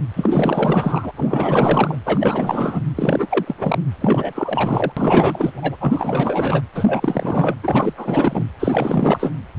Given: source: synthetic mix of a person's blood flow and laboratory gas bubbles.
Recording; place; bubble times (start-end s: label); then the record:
Doppler ultrasound of blood flow; precordium
0.16-1.12 s: bubbles
1.17-1.98 s: bubbles
2.04-2.82 s: bubbles
2.96-3.27 s: bubbles
3.30-3.55 s: bubbles
3.58-3.79 s: bubbles
4.00-4.92 s: bubbles
4.96-5.77 s: bubbles
5.80-6.62 s: bubbles
6.75-7.55 s: bubbles
7.63-7.93 s: bubbles
7.98-8.45 s: bubbles
8.59-9.31 s: bubbles
From the record:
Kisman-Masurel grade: 444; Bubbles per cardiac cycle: continuous sound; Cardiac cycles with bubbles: 100%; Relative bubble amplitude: maximal (0.775 to 0.999); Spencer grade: 4 (maximum detectable bubble signal sounding continuously throughout systole and diastole of every cardiac period, and overriding the amplitude of the normal cardiac signals); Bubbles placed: anywhere in the cardiac cycle